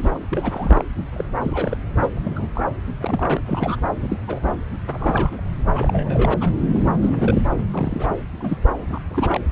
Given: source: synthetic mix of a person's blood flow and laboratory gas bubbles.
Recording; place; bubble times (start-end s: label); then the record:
Doppler ultrasound of blood flow; subclavian vein
0.00-0.09 s: bubbles
0.14-0.19 s: bubbles
0.29-0.85 s: bubbles
1.16-1.25 s: bubbles
1.37-1.76 s: bubbles
1.96-2.09 s: bubbles
2.17-2.19 s: bubbles
2.24-2.48 s: bubbles
2.55-2.62 s: bubbles
3.00-3.40 s: bubbles
3.45-3.76 s: bubbles
4.01-4.17 s: bubbles
4.27-4.39 s: bubbles
4.42-4.49 s: bubbles
4.92-5.41 s: bubbles
5.74-6.34 s: bubbles
6.41-6.54 s: bubbles
6.73-6.89 s: bubbles
7.02-7.42 s: bubbles
7.73-8.08 s: bubbles
8.40-8.58 s: bubbles
8.90-9.00 s: bubbles
9.11-9.41 s: bubbles
From the record:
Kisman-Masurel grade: 242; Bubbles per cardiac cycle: several, 3 to 8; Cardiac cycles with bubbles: 100%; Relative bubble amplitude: moderate (0.250 to 0.450); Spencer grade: 3 (all of the cardiac periods contain showers or single bubble signals, but not dominating or overriding the cardiac motion signals); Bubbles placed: anywhere in the cardiac cycle